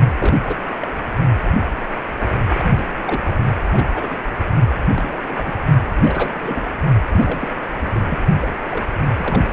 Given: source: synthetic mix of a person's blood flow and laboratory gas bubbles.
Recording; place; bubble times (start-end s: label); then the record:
Doppler ultrasound of blood flow; precordium
0.18-0.57 s: bubbles
0.81-0.87 s: bubbles
2.19-2.27 s: bubbles
2.48-2.73 s: bubbles
2.75-2.92 s: bubbles
3.04-3.23 s: bubbles
3.26-3.34 s: bubbles
3.71-3.88 s: bubbles
3.95-4.07 s: bubbles
4.10-4.17 s: bubbles
4.96-5.21 s: bubbles
5.27-5.56 s: bubbles
6.02-6.62 s: bubbles
7.09-7.49 s: bubbles
7.80-7.91 s: bubbles
7.93-8.00 s: bubbles
8.09-8.19 s: bubbles
8.41-8.48 s: bubbles
8.71-8.85 s: bubbles
9.17-9.51 s: bubbles
From the record:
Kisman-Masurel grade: 242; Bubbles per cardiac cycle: several, 3 to 8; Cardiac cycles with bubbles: 100%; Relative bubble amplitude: moderate (0.250 to 0.450); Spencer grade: 3 (all of the cardiac periods contain showers or single bubble signals, but not dominating or overriding the cardiac motion signals); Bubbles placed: only in the low amplitude regions of the cardiac cycle